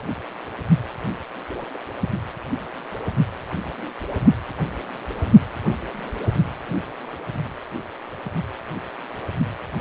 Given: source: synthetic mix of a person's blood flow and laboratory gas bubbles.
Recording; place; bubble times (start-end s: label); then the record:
Doppler ultrasound of blood flow; precordium
1.73-1.78 s: bubbles
From the record:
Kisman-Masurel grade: 111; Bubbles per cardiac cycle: 1 to 2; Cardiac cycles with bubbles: 1 to 10%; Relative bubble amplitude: barely perceptible (0.100 to 0.250); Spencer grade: 1 (occasional bubble signal discernible with the cardiac motion signal, with majority of cardiac periods free of bubbles); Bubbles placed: only in the low amplitude regions of the cardiac cycle